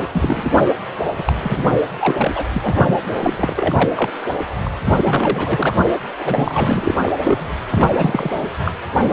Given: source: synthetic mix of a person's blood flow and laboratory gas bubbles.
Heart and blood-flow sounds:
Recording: Doppler ultrasound of blood flow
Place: precordium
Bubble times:
0.00-0.04 s: bubbles
0.12-0.69 s: bubbles
1.17-1.33 s: bubbles
1.42-1.77 s: bubbles
1.99-2.32 s: bubbles
2.35-2.44 s: bubbles
2.54-2.97 s: bubbles
3.21-3.90 s: bubbles
3.96-4.10 s: bubbles
4.64-4.68 s: bubbles
5.04-5.76 s: bubbles
6.18-6.95 s: bubbles
7.01-7.12 s: bubbles
7.23-7.49 s: bubbles
7.70-8.29 s: bubbles
8.64-8.72 s: bubbles
8.97-9.13 s: bubbles
From the record:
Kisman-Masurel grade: 342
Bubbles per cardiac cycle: rolling drumbeat, 9 or more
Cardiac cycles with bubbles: 100%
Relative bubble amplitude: moderate (0.250 to 0.450)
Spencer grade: 3 (all of the cardiac periods contain showers or single bubble signals, but not dominating or overriding the cardiac motion signals)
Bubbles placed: anywhere in the cardiac cycle

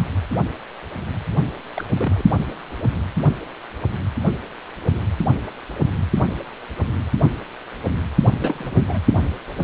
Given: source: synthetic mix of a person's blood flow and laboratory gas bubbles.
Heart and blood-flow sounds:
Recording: Doppler ultrasound of blood flow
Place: precordium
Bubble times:
1.35-1.50 s: bubbles
1.76-2.23 s: bubbles
8.41-8.99 s: bubbles
From the record:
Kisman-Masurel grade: 221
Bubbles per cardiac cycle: several, 3 to 8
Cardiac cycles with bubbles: 10 to 50%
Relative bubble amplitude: barely perceptible (0.100 to 0.250)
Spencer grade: 2 (many but less than half of the cardiac periods contain bubble signals, singularly or in groups)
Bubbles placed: only in the low amplitude regions of the cardiac cycle

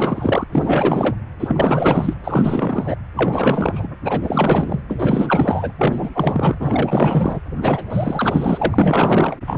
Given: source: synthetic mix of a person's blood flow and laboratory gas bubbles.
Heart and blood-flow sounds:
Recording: Doppler ultrasound of blood flow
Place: precordium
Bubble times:
0.00-0.44 s: bubbles
0.52-1.16 s: bubbles
1.40-2.13 s: bubbles
2.23-2.96 s: bubbles
3.16-3.87 s: bubbles
4.04-4.81 s: bubbles
4.89-5.72 s: bubbles
5.78-6.10 s: bubbles
6.13-6.57 s: bubbles
6.60-7.40 s: bubbles
7.62-7.84 s: bubbles
7.89-9.37 s: bubbles
9.46-9.58 s: bubbles
From the record:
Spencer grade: 4 (maximum detectable bubble signal sounding continuously throughout systole and diastole of every cardiac period, and overriding the amplitude of the normal cardiac signals)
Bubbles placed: anywhere in the cardiac cycle

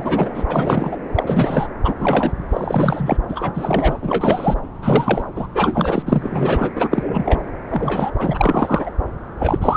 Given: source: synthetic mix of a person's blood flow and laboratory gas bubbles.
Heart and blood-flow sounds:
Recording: Doppler ultrasound of blood flow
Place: subclavian vein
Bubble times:
0.00-0.43 s: bubbles
0.47-0.97 s: bubbles
1.15-1.24 s: bubbles
1.27-1.68 s: bubbles
1.83-1.95 s: bubbles
1.99-2.47 s: bubbles
2.51-3.17 s: bubbles
3.28-3.97 s: bubbles
4.01-4.55 s: bubbles
4.82-5.23 s: bubbles
5.35-5.46 s: bubbles
5.54-6.02 s: bubbles
6.06-6.70 s: bubbles
6.75-6.88 s: bubbles
6.91-7.41 s: bubbles
7.67-8.11 s: bubbles
8.18-8.90 s: bubbles
9.39-9.58 s: bubbles
9.61-9.77 s: bubbles
From the record:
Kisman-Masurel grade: 343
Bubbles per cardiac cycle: rolling drumbeat, 9 or more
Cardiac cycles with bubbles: 100%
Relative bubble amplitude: loud (0.450 to 0.775)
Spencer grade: 3 (all of the cardiac periods contain showers or single bubble signals, but not dominating or overriding the cardiac motion signals)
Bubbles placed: anywhere in the cardiac cycle

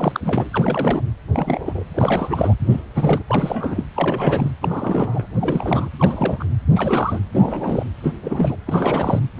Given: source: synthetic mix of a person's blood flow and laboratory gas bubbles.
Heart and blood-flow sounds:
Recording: Doppler ultrasound of blood flow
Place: precordium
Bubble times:
0.00-0.20 s: bubbles
0.24-0.49 s: bubbles
0.53-1.02 s: bubbles
1.33-1.84 s: bubbles
1.94-2.54 s: bubbles
2.69-2.83 s: bubbles
2.95-3.23 s: bubbles
3.27-3.84 s: bubbles
3.96-4.50 s: bubbles
4.62-5.27 s: bubbles
5.36-5.88 s: bubbles
5.98-6.45 s: bubbles
6.75-7.20 s: bubbles
7.32-7.84 s: bubbles
8.03-8.11 s: bubbles
8.23-8.56 s: bubbles
8.66-9.21 s: bubbles
9.37-9.40 s: bubbles
From the record:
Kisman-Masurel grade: 342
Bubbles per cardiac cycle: rolling drumbeat, 9 or more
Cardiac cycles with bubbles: 100%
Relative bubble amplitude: moderate (0.250 to 0.450)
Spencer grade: 3 (all of the cardiac periods contain showers or single bubble signals, but not dominating or overriding the cardiac motion signals)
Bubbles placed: anywhere in the cardiac cycle

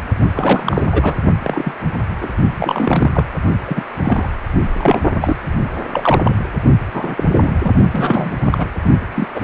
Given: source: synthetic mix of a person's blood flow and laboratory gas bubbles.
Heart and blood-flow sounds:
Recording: Doppler ultrasound of blood flow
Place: precordium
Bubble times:
0.34-0.89 s: bubbles
0.92-1.15 s: bubbles
1.43-1.73 s: bubbles
2.21-2.33 s: bubbles
2.57-3.25 s: bubbles
3.67-3.83 s: bubbles
3.90-4.28 s: bubbles
4.77-5.00 s: bubbles
5.21-5.38 s: bubbles
5.92-6.36 s: bubbles
6.94-7.51 s: bubbles
7.64-7.72 s: bubbles
7.93-8.31 s: bubbles
8.39-8.67 s: bubbles
9.15-9.28 s: bubbles
9.34-9.41 s: bubbles
From the record:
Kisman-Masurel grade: 243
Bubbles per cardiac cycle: several, 3 to 8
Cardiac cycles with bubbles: 100%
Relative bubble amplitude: loud (0.450 to 0.775)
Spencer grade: 3 (all of the cardiac periods contain showers or single bubble signals, but not dominating or overriding the cardiac motion signals)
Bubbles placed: only in the low amplitude regions of the cardiac cycle

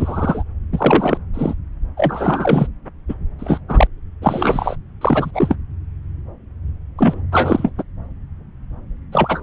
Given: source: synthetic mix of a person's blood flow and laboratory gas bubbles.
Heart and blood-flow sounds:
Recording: Doppler ultrasound of blood flow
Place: subclavian vein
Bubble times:
0.00-0.44 s: bubbles
0.72-1.18 s: bubbles
1.34-1.54 s: bubbles
1.97-2.67 s: bubbles
3.08-3.14 s: bubbles
3.39-3.59 s: bubbles
3.68-3.87 s: bubbles
4.21-4.76 s: bubbles
5.01-5.30 s: bubbles
5.33-5.56 s: bubbles
6.98-7.21 s: bubbles
7.31-7.72 s: bubbles
7.78-7.83 s: bubbles
9.12-9.43 s: bubbles
From the record:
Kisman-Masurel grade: 333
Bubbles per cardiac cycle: rolling drumbeat, 9 or more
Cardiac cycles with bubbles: 50 to 99%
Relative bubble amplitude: loud (0.450 to 0.775)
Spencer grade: 3 (all of the cardiac periods contain showers or single bubble signals, but not dominating or overriding the cardiac motion signals)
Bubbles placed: anywhere in the cardiac cycle

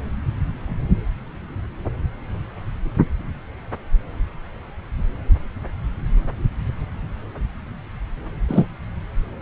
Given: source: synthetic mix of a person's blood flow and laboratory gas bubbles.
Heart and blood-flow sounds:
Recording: Doppler ultrasound of blood flow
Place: subclavian vein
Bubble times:
8.49-8.65 s: bubbles
From the record:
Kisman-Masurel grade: 113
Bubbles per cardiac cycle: 1 to 2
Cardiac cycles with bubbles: 1 to 10%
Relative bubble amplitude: loud (0.450 to 0.775)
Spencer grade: 1 (occasional bubble signal discernible with the cardiac motion signal, with majority of cardiac periods free of bubbles)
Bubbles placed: anywhere in the cardiac cycle

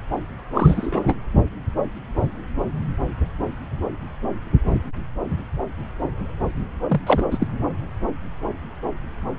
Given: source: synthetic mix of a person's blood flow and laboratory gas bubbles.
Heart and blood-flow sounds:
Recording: Doppler ultrasound of blood flow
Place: subclavian vein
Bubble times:
0.53-1.14 s: bubbles
6.89-7.01 s: bubbles
7.06-7.25 s: bubbles
7.30-7.47 s: bubbles
From the record:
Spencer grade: 2 (many but less than half of the cardiac periods contain bubble signals, singularly or in groups)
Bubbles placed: anywhere in the cardiac cycle

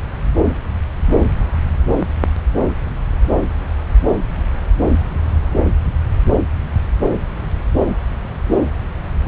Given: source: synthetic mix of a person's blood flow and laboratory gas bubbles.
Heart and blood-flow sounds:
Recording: Doppler ultrasound of blood flow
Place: subclavian vein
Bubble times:
no bubbles
From the record:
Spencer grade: 0 (complete lack of bubble signals)

